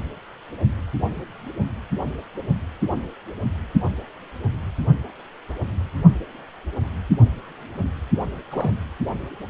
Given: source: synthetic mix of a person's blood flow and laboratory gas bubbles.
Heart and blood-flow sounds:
Doppler ultrasound of blood flow; precordium
8.50-8.71 s: bubbles
From the record:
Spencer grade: 1 (occasional bubble signal discernible with the cardiac motion signal, with majority of cardiac periods free of bubbles); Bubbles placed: anywhere in the cardiac cycle

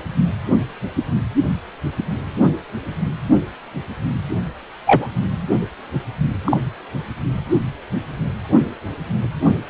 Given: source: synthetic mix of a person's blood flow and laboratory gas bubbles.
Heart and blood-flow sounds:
Doppler ultrasound of blood flow; precordium
4.86-5.07 s: bubbles
6.45-6.57 s: bubbles
From the record:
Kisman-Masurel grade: 123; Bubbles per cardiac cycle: 1 to 2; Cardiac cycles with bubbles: 10 to 50%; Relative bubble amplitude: loud (0.450 to 0.775); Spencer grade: 2 (many but less than half of the cardiac periods contain bubble signals, singularly or in groups); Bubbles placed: anywhere in the cardiac cycle

